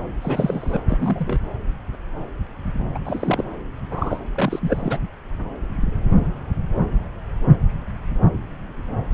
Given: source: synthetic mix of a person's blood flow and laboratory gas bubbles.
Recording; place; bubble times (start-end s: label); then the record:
Doppler ultrasound of blood flow; subclavian vein
0.21-0.83 s: bubbles
0.89-1.39 s: bubbles
2.94-2.99 s: bubbles
3.05-3.44 s: bubbles
3.91-4.20 s: bubbles
4.35-4.98 s: bubbles
From the record:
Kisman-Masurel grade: 222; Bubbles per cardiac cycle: several, 3 to 8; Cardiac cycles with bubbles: 10 to 50%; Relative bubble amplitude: moderate (0.250 to 0.450); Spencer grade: 2 (many but less than half of the cardiac periods contain bubble signals, singularly or in groups); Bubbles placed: anywhere in the cardiac cycle